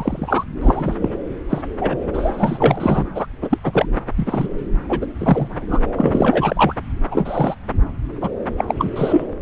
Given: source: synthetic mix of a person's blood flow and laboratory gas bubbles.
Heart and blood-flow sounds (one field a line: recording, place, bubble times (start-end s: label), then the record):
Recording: Doppler ultrasound of blood flow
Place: subclavian vein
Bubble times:
0.00-0.44 s: bubbles
0.61-0.95 s: bubbles
1.01-1.09 s: bubbles
1.49-1.62 s: bubbles
1.80-1.98 s: bubbles
2.13-3.03 s: bubbles
3.15-3.27 s: bubbles
3.42-3.58 s: bubbles
3.64-3.86 s: bubbles
4.17-4.47 s: bubbles
4.88-5.06 s: bubbles
5.19-5.48 s: bubbles
5.69-5.79 s: bubbles
5.96-6.74 s: bubbles
7.11-7.54 s: bubbles
8.21-8.29 s: bubbles
8.57-8.64 s: bubbles
8.67-8.74 s: bubbles
8.78-8.90 s: bubbles
8.96-9.26 s: bubbles
From the record:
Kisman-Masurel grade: 243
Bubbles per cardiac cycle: several, 3 to 8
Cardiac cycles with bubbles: 100%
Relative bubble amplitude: loud (0.450 to 0.775)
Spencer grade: 3 (all of the cardiac periods contain showers or single bubble signals, but not dominating or overriding the cardiac motion signals)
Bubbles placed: anywhere in the cardiac cycle